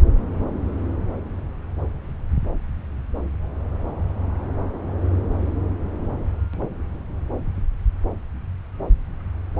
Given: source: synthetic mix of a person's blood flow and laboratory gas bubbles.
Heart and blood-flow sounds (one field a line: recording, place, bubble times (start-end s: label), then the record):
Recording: Doppler ultrasound of blood flow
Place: subclavian vein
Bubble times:
no bubbles
From the record:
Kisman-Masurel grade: 000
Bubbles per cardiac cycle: 0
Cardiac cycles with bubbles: 0%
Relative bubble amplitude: no bubbles discernible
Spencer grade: 0 (complete lack of bubble signals)